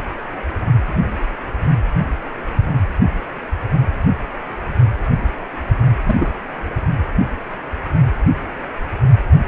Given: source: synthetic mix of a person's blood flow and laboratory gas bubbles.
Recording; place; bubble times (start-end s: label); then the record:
Doppler ultrasound of blood flow; precordium
6.03-6.32 s: bubbles
From the record:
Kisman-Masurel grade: 122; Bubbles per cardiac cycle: 1 to 2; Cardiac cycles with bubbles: 10 to 50%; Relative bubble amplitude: moderate (0.250 to 0.450); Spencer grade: 2 (many but less than half of the cardiac periods contain bubble signals, singularly or in groups); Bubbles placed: only in the low amplitude regions of the cardiac cycle